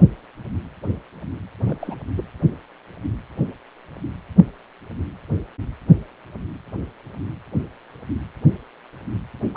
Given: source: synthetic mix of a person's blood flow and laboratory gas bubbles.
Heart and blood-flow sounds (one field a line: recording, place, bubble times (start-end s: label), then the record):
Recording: Doppler ultrasound of blood flow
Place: precordium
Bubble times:
1.58-1.98 s: bubbles
2.16-2.25 s: bubbles
9.54-9.57 s: bubbles
From the record:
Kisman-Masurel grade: 221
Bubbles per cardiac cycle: several, 3 to 8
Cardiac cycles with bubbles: 10 to 50%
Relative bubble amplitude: barely perceptible (0.100 to 0.250)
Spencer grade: 2 (many but less than half of the cardiac periods contain bubble signals, singularly or in groups)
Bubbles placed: only in the low amplitude regions of the cardiac cycle